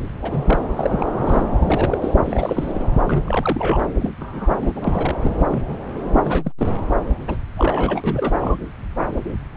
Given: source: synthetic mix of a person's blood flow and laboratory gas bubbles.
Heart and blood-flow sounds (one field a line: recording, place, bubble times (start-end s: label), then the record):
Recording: Doppler ultrasound of blood flow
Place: subclavian vein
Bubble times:
0.22-0.63 s: bubbles
0.76-1.09 s: bubbles
1.19-1.45 s: bubbles
1.60-1.98 s: bubbles
2.01-2.14 s: bubbles
2.24-2.88 s: bubbles
3.06-3.81 s: bubbles
3.99-4.10 s: bubbles
4.20-4.54 s: bubbles
4.62-4.71 s: bubbles
4.75-5.15 s: bubbles
5.21-5.36 s: bubbles
5.50-5.64 s: bubbles
5.68-5.76 s: bubbles
6.15-6.52 s: bubbles
6.58-6.70 s: bubbles
7.28-7.38 s: bubbles
7.57-8.01 s: bubbles
8.04-8.56 s: bubbles
9.54-9.57 s: bubbles
From the record:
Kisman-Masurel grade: 242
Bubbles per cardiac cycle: several, 3 to 8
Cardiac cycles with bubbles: 100%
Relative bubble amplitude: moderate (0.250 to 0.450)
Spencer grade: 3 (all of the cardiac periods contain showers or single bubble signals, but not dominating or overriding the cardiac motion signals)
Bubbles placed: anywhere in the cardiac cycle